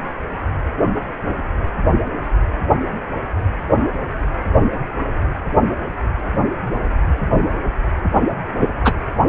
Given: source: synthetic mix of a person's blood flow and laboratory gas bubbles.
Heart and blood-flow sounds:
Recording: Doppler ultrasound of blood flow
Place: precordium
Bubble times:
8.60-8.69 s: bubbles
8.84-8.94 s: bubbles
From the record:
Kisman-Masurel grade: 123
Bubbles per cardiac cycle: 1 to 2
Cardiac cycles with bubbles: 10 to 50%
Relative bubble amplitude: loud (0.450 to 0.775)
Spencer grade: 2 (many but less than half of the cardiac periods contain bubble signals, singularly or in groups)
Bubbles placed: anywhere in the cardiac cycle

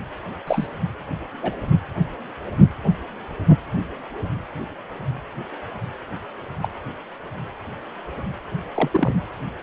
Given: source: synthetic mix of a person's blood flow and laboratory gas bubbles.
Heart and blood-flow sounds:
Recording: Doppler ultrasound of blood flow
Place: precordium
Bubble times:
0.47-0.67 s: bubbles
1.42-1.54 s: bubbles
6.62-6.70 s: bubbles
8.75-9.16 s: bubbles
From the record:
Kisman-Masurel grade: 122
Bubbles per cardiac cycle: 1 to 2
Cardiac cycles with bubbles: 10 to 50%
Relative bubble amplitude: moderate (0.250 to 0.450)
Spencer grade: 2 (many but less than half of the cardiac periods contain bubble signals, singularly or in groups)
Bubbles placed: anywhere in the cardiac cycle

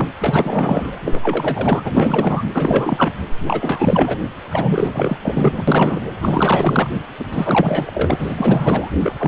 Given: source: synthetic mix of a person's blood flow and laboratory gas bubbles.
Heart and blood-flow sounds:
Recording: Doppler ultrasound of blood flow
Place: precordium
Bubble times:
0.00-0.09 s: bubbles
0.19-0.97 s: bubbles
1.05-1.92 s: bubbles
1.96-2.42 s: bubbles
2.53-3.13 s: bubbles
3.46-4.19 s: bubbles
4.50-5.17 s: bubbles
5.24-5.62 s: bubbles
5.68-6.01 s: bubbles
6.22-6.90 s: bubbles
7.19-7.25 s: bubbles
7.33-8.89 s: bubbles
9.03-9.16 s: bubbles
9.18-9.28 s: bubbles
From the record:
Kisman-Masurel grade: 444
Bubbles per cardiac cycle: continuous sound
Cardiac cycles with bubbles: 100%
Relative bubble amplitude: maximal (0.775 to 0.999)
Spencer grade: 4 (maximum detectable bubble signal sounding continuously throughout systole and diastole of every cardiac period, and overriding the amplitude of the normal cardiac signals)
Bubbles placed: anywhere in the cardiac cycle

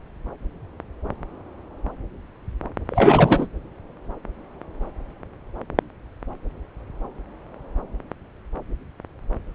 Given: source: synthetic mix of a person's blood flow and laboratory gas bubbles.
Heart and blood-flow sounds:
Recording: Doppler ultrasound of blood flow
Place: subclavian vein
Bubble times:
2.90-3.48 s: bubbles
From the record:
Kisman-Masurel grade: 213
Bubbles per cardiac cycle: several, 3 to 8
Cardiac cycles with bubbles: 1 to 10%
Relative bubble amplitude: loud (0.450 to 0.775)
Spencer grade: 1 (occasional bubble signal discernible with the cardiac motion signal, with majority of cardiac periods free of bubbles)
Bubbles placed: anywhere in the cardiac cycle

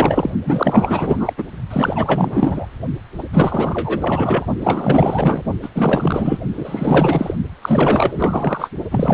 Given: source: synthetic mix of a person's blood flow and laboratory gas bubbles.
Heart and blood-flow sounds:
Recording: Doppler ultrasound of blood flow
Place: precordium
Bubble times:
0.00-0.30 s: bubbles
0.44-1.33 s: bubbles
1.38-1.44 s: bubbles
1.70-2.67 s: bubbles
3.18-3.23 s: bubbles
3.32-4.45 s: bubbles
4.60-5.43 s: bubbles
5.62-5.69 s: bubbles
5.75-6.38 s: bubbles
6.57-7.33 s: bubbles
7.62-8.69 s: bubbles
8.91-9.14 s: bubbles
From the record:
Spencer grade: 4 (maximum detectable bubble signal sounding continuously throughout systole and diastole of every cardiac period, and overriding the amplitude of the normal cardiac signals)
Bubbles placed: only in the low amplitude regions of the cardiac cycle

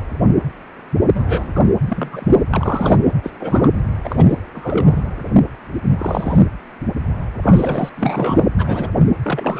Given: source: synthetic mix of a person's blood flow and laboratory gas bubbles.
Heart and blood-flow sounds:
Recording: Doppler ultrasound of blood flow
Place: precordium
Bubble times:
1.14-1.64 s: bubbles
1.86-2.39 s: bubbles
2.50-2.99 s: bubbles
3.23-3.31 s: bubbles
3.40-3.73 s: bubbles
4.03-4.36 s: bubbles
4.54-5.06 s: bubbles
5.98-6.45 s: bubbles
7.42-7.90 s: bubbles
7.98-8.48 s: bubbles
8.58-8.91 s: bubbles
9.23-9.59 s: bubbles
From the record:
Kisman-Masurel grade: 233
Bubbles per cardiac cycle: several, 3 to 8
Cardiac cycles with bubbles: 50 to 99%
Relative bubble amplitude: loud (0.450 to 0.775)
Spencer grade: 3 (all of the cardiac periods contain showers or single bubble signals, but not dominating or overriding the cardiac motion signals)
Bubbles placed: anywhere in the cardiac cycle

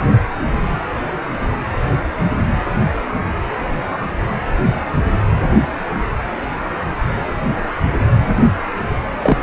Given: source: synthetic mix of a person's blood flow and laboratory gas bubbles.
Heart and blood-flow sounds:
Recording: Doppler ultrasound of blood flow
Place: precordium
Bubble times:
9.20-9.37 s: bubbles
From the record:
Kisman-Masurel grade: 213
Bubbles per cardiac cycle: several, 3 to 8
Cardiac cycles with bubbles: 1 to 10%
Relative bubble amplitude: loud (0.450 to 0.775)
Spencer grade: 1 (occasional bubble signal discernible with the cardiac motion signal, with majority of cardiac periods free of bubbles)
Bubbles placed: anywhere in the cardiac cycle

